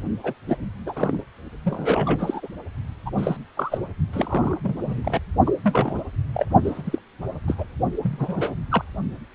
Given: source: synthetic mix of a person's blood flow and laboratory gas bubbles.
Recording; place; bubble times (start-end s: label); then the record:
Doppler ultrasound of blood flow; precordium
0.23-0.33 s: bubbles
0.46-0.57 s: bubbles
0.85-1.24 s: bubbles
1.64-2.48 s: bubbles
3.06-3.10 s: bubbles
3.17-3.37 s: bubbles
3.56-3.78 s: bubbles
4.13-4.58 s: bubbles
4.63-5.20 s: bubbles
5.46-5.51 s: bubbles
5.63-6.01 s: bubbles
6.34-6.46 s: bubbles
6.64-6.99 s: bubbles
7.47-7.55 s: bubbles
7.58-7.64 s: bubbles
8.03-8.55 s: bubbles
8.71-8.85 s: bubbles
From the record:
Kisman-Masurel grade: 242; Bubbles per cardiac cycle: several, 3 to 8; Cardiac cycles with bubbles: 100%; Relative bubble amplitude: moderate (0.250 to 0.450); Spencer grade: 3 (all of the cardiac periods contain showers or single bubble signals, but not dominating or overriding the cardiac motion signals); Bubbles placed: only in the low amplitude regions of the cardiac cycle